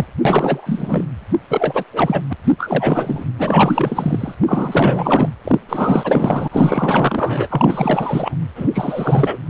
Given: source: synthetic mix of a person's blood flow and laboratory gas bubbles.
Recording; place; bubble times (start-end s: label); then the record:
Doppler ultrasound of blood flow; precordium
0.00-0.05 s: bubbles
0.25-1.04 s: bubbles
1.49-1.84 s: bubbles
1.93-2.21 s: bubbles
2.30-2.33 s: bubbles
2.44-2.53 s: bubbles
2.58-3.25 s: bubbles
3.38-4.35 s: bubbles
4.46-5.29 s: bubbles
5.44-5.60 s: bubbles
5.69-6.48 s: bubbles
6.52-7.48 s: bubbles
7.50-8.36 s: bubbles
8.55-8.70 s: bubbles
8.73-9.38 s: bubbles
From the record:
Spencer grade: 4 (maximum detectable bubble signal sounding continuously throughout systole and diastole of every cardiac period, and overriding the amplitude of the normal cardiac signals); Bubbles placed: anywhere in the cardiac cycle